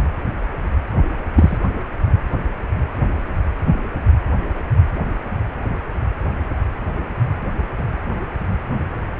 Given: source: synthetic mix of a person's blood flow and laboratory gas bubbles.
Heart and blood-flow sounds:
Doppler ultrasound of blood flow; precordium
1.35-1.58 s: bubbles
From the record:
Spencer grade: 2 (many but less than half of the cardiac periods contain bubble signals, singularly or in groups); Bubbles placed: anywhere in the cardiac cycle

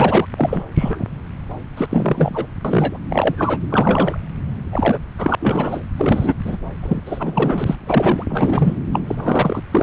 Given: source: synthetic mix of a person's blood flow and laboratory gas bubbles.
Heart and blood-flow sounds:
Doppler ultrasound of blood flow; subclavian vein
0.00-0.27 s: bubbles
0.37-0.64 s: bubbles
0.75-1.05 s: bubbles
1.77-1.87 s: bubbles
1.90-2.46 s: bubbles
2.65-2.98 s: bubbles
3.09-3.59 s: bubbles
3.69-4.18 s: bubbles
4.71-4.99 s: bubbles
5.18-5.35 s: bubbles
5.40-5.83 s: bubbles
5.97-6.34 s: bubbles
6.44-6.57 s: bubbles
6.82-7.01 s: bubbles
7.06-7.76 s: bubbles
7.87-8.23 s: bubbles
8.29-8.79 s: bubbles
8.92-9.00 s: bubbles
9.07-9.15 s: bubbles
9.18-9.62 s: bubbles
9.71-9.83 s: bubbles
From the record:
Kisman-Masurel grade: 333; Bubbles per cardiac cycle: rolling drumbeat, 9 or more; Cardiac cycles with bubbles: 50 to 99%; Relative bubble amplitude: loud (0.450 to 0.775); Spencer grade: 3 (all of the cardiac periods contain showers or single bubble signals, but not dominating or overriding the cardiac motion signals); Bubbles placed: anywhere in the cardiac cycle

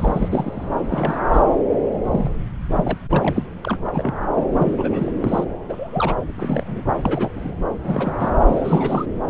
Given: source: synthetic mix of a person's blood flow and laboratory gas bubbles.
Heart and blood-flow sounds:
Doppler ultrasound of blood flow; subclavian vein
0.00-0.29 s: bubbles
0.32-0.69 s: bubbles
0.80-1.15 s: bubbles
1.28-1.42 s: bubbles
2.05-2.35 s: bubbles
2.75-2.98 s: bubbles
3.09-3.48 s: bubbles
3.63-3.77 s: bubbles
3.86-4.14 s: bubbles
4.34-4.44 s: bubbles
4.58-5.12 s: bubbles
5.21-5.44 s: bubbles
5.68-6.15 s: bubbles
6.34-6.84 s: bubbles
6.96-7.30 s: bubbles
7.35-7.56 s: bubbles
7.84-8.12 s: bubbles
8.19-8.31 s: bubbles
8.46-9.06 s: bubbles
9.27-9.30 s: bubbles
From the record:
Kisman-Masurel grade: 242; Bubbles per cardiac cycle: several, 3 to 8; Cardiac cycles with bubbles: 100%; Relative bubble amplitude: moderate (0.250 to 0.450); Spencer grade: 3 (all of the cardiac periods contain showers or single bubble signals, but not dominating or overriding the cardiac motion signals); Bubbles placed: anywhere in the cardiac cycle

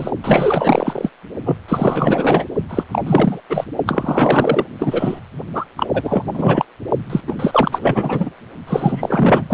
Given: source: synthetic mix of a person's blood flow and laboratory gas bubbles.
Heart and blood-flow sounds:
Doppler ultrasound of blood flow; precordium
0.00-0.10 s: bubbles
0.24-1.11 s: bubbles
1.45-1.56 s: bubbles
1.68-2.44 s: bubbles
2.69-2.83 s: bubbles
2.91-3.41 s: bubbles
3.49-3.65 s: bubbles
3.86-4.65 s: bubbles
4.79-5.21 s: bubbles
5.54-5.66 s: bubbles
5.77-5.87 s: bubbles
5.94-6.23 s: bubbles
6.33-6.66 s: bubbles
7.10-7.21 s: bubbles
7.27-8.29 s: bubbles
8.67-9.54 s: bubbles
From the record:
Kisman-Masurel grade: 444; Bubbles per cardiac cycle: continuous sound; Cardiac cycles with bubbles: 100%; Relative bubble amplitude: maximal (0.775 to 0.999); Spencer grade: 4 (maximum detectable bubble signal sounding continuously throughout systole and diastole of every cardiac period, and overriding the amplitude of the normal cardiac signals); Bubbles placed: only in the low amplitude regions of the cardiac cycle

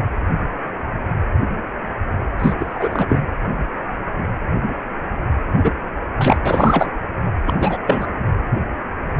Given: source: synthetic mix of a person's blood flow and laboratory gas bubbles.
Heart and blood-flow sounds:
Doppler ultrasound of blood flow; precordium
2.38-2.53 s: bubbles
2.58-3.05 s: bubbles
3.08-3.20 s: bubbles
5.64-5.72 s: bubbles
6.19-6.39 s: bubbles
6.46-6.90 s: bubbles
7.46-7.54 s: bubbles
7.60-7.78 s: bubbles
7.87-8.06 s: bubbles
From the record:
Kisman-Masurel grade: 223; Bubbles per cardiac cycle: several, 3 to 8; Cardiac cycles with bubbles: 10 to 50%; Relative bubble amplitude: loud (0.450 to 0.775); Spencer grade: 2 (many but less than half of the cardiac periods contain bubble signals, singularly or in groups); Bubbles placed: anywhere in the cardiac cycle

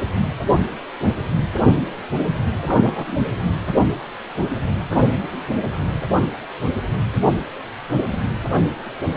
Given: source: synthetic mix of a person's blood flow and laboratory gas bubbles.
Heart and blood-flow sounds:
Doppler ultrasound of blood flow; precordium
2.65-3.17 s: bubbles
From the record:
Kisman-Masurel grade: 212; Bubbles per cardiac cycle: several, 3 to 8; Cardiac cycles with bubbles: 1 to 10%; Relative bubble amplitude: moderate (0.250 to 0.450); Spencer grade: 1 (occasional bubble signal discernible with the cardiac motion signal, with majority of cardiac periods free of bubbles); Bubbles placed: anywhere in the cardiac cycle

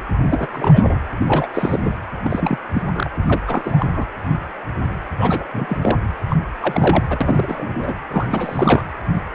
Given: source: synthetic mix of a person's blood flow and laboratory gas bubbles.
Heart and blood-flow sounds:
Doppler ultrasound of blood flow; precordium
0.22-0.47 s: bubbles
0.51-0.97 s: bubbles
1.21-1.49 s: bubbles
1.54-1.94 s: bubbles
2.23-2.58 s: bubbles
2.74-2.83 s: bubbles
2.94-3.09 s: bubbles
3.26-3.40 s: bubbles
3.47-3.86 s: bubbles
3.91-4.06 s: bubbles
5.17-5.45 s: bubbles
5.53-5.78 s: bubbles
5.82-5.97 s: bubbles
6.29-6.37 s: bubbles
6.62-7.04 s: bubbles
7.09-7.95 s: bubbles
8.11-8.27 s: bubbles
8.29-8.85 s: bubbles
From the record:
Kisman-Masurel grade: 332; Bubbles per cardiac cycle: rolling drumbeat, 9 or more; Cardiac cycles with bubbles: 50 to 99%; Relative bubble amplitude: moderate (0.250 to 0.450); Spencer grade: 3 (all of the cardiac periods contain showers or single bubble signals, but not dominating or overriding the cardiac motion signals); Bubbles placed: anywhere in the cardiac cycle

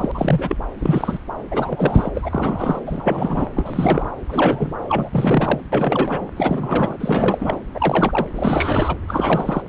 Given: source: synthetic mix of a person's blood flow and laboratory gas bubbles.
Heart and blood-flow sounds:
Doppler ultrasound of blood flow; subclavian vein
0.00-0.11 s: bubbles
0.14-0.57 s: bubbles
0.79-1.18 s: bubbles
1.50-2.11 s: bubbles
2.15-2.80 s: bubbles
2.86-3.48 s: bubbles
3.55-4.09 s: bubbles
4.29-4.73 s: bubbles
4.89-5.08 s: bubbles
5.12-5.61 s: bubbles
5.72-6.29 s: bubbles
6.36-6.97 s: bubbles
7.00-7.60 s: bubbles
7.74-8.27 s: bubbles
8.34-8.96 s: bubbles
9.08-9.62 s: bubbles
From the record:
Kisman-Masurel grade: 342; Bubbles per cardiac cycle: rolling drumbeat, 9 or more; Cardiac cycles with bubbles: 100%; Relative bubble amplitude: moderate (0.250 to 0.450); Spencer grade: 3 (all of the cardiac periods contain showers or single bubble signals, but not dominating or overriding the cardiac motion signals); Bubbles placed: anywhere in the cardiac cycle

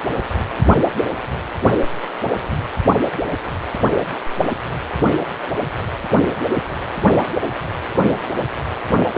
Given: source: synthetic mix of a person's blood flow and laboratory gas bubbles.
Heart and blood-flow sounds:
Doppler ultrasound of blood flow; precordium
9.12-9.18 s: bubbles
From the record:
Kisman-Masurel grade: 213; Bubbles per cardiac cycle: several, 3 to 8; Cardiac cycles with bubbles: 1 to 10%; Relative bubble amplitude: loud (0.450 to 0.775); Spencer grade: 1 (occasional bubble signal discernible with the cardiac motion signal, with majority of cardiac periods free of bubbles); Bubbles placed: only in the low amplitude regions of the cardiac cycle

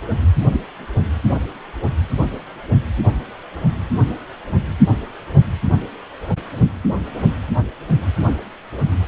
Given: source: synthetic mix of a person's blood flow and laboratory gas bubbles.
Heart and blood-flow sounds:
Doppler ultrasound of blood flow; precordium
0.52-0.60 s: bubbles
From the record:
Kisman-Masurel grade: 112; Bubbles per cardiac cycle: 1 to 2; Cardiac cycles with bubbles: 1 to 10%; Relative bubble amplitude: moderate (0.250 to 0.450); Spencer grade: 1 (occasional bubble signal discernible with the cardiac motion signal, with majority of cardiac periods free of bubbles); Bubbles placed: only in the low amplitude regions of the cardiac cycle

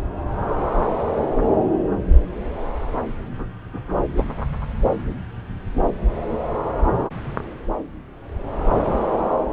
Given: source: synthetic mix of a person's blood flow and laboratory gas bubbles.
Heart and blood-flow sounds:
Doppler ultrasound of blood flow; subclavian vein
4.17-4.23 s: bubbles
From the record:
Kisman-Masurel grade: 123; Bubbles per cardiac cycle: 1 to 2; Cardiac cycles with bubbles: 10 to 50%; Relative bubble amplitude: loud (0.450 to 0.775); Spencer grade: 2 (many but less than half of the cardiac periods contain bubble signals, singularly or in groups); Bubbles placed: anywhere in the cardiac cycle

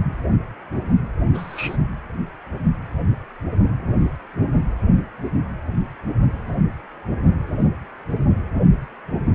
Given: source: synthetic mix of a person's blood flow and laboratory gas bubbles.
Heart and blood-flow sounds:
Doppler ultrasound of blood flow; precordium
1.33-1.77 s: bubbles
From the record:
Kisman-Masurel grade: 111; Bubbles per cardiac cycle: 1 to 2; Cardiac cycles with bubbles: 1 to 10%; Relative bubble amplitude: barely perceptible (0.100 to 0.250); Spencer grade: 1 (occasional bubble signal discernible with the cardiac motion signal, with majority of cardiac periods free of bubbles); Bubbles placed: anywhere in the cardiac cycle

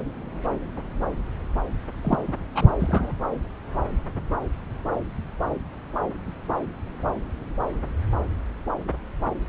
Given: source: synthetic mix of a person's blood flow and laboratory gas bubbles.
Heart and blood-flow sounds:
Doppler ultrasound of blood flow; subclavian vein
2.04-2.17 s: bubbles
2.27-2.32 s: bubbles
2.54-2.67 s: bubbles
2.79-3.12 s: bubbles
From the record:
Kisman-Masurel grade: 213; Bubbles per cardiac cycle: several, 3 to 8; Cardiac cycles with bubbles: 1 to 10%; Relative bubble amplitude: loud (0.450 to 0.775); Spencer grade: 1 (occasional bubble signal discernible with the cardiac motion signal, with majority of cardiac periods free of bubbles); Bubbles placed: anywhere in the cardiac cycle

